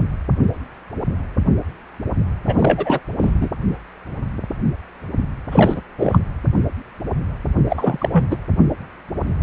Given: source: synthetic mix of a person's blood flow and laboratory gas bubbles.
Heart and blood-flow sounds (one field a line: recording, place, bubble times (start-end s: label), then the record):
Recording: Doppler ultrasound of blood flow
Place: precordium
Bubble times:
2.46-3.00 s: bubbles
3.18-3.34 s: bubbles
3.40-3.48 s: bubbles
5.51-5.81 s: bubbles
5.98-6.19 s: bubbles
7.69-8.09 s: bubbles
8.12-8.25 s: bubbles
8.30-8.37 s: bubbles
From the record:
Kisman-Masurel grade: 223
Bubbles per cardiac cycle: several, 3 to 8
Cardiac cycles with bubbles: 10 to 50%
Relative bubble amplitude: loud (0.450 to 0.775)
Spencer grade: 2 (many but less than half of the cardiac periods contain bubble signals, singularly or in groups)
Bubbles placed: anywhere in the cardiac cycle